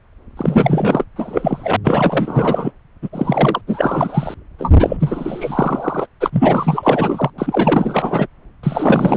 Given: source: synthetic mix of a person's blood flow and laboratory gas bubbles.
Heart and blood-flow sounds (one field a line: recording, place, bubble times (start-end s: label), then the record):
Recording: Doppler ultrasound of blood flow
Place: subclavian vein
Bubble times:
0.37-1.05 s: bubbles
1.16-1.76 s: bubbles
1.84-2.71 s: bubbles
3.01-3.08 s: bubbles
3.12-3.61 s: bubbles
3.66-4.35 s: bubbles
4.58-4.75 s: bubbles
4.79-4.97 s: bubbles
5.00-6.07 s: bubbles
6.20-7.30 s: bubbles
7.38-8.27 s: bubbles
8.63-9.17 s: bubbles
From the record:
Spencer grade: 4 (maximum detectable bubble signal sounding continuously throughout systole and diastole of every cardiac period, and overriding the amplitude of the normal cardiac signals)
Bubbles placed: anywhere in the cardiac cycle